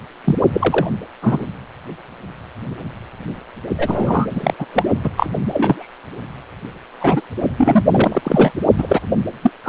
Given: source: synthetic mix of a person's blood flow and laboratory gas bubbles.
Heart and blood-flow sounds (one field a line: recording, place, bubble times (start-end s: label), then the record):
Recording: Doppler ultrasound of blood flow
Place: precordium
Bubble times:
0.24-0.36 s: bubbles
0.53-0.87 s: bubbles
1.22-1.47 s: bubbles
3.78-4.26 s: bubbles
4.30-4.54 s: bubbles
4.58-4.66 s: bubbles
4.74-4.83 s: bubbles
5.04-5.10 s: bubbles
5.17-5.26 s: bubbles
5.50-5.90 s: bubbles
7.00-7.21 s: bubbles
7.58-7.83 s: bubbles
7.89-8.21 s: bubbles
8.24-8.52 s: bubbles
8.78-9.00 s: bubbles
9.41-9.50 s: bubbles
9.64-9.69 s: bubbles
From the record:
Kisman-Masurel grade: 233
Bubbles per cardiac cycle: several, 3 to 8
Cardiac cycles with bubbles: 50 to 99%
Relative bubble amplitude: loud (0.450 to 0.775)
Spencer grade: 3 (all of the cardiac periods contain showers or single bubble signals, but not dominating or overriding the cardiac motion signals)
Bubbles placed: only in the low amplitude regions of the cardiac cycle